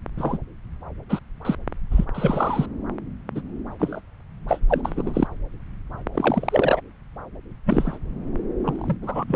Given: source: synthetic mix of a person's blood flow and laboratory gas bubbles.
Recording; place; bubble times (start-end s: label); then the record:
Doppler ultrasound of blood flow; subclavian vein
0.17-0.38 s: bubbles
1.09-1.19 s: bubbles
1.44-1.55 s: bubbles
1.91-2.05 s: bubbles
2.14-2.66 s: bubbles
3.35-3.41 s: bubbles
3.78-4.00 s: bubbles
4.47-4.59 s: bubbles
4.68-4.81 s: bubbles
4.84-5.27 s: bubbles
6.14-6.80 s: bubbles
7.65-7.98 s: bubbles
8.64-8.96 s: bubbles
9.01-9.24 s: bubbles
9.28-9.36 s: bubbles
From the record:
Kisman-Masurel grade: 243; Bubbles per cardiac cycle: several, 3 to 8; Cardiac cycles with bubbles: 100%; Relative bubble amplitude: loud (0.450 to 0.775); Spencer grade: 3 (all of the cardiac periods contain showers or single bubble signals, but not dominating or overriding the cardiac motion signals); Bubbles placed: anywhere in the cardiac cycle